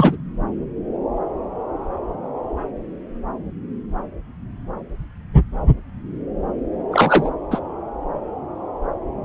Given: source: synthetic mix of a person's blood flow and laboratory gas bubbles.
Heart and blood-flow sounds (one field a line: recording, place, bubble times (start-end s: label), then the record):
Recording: Doppler ultrasound of blood flow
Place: subclavian vein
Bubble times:
0.00-0.17 s: bubbles
6.91-7.30 s: bubbles
7.50-7.60 s: bubbles
From the record:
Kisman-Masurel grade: 223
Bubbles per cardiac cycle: several, 3 to 8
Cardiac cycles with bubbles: 10 to 50%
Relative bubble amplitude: loud (0.450 to 0.775)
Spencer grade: 2 (many but less than half of the cardiac periods contain bubble signals, singularly or in groups)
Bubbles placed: anywhere in the cardiac cycle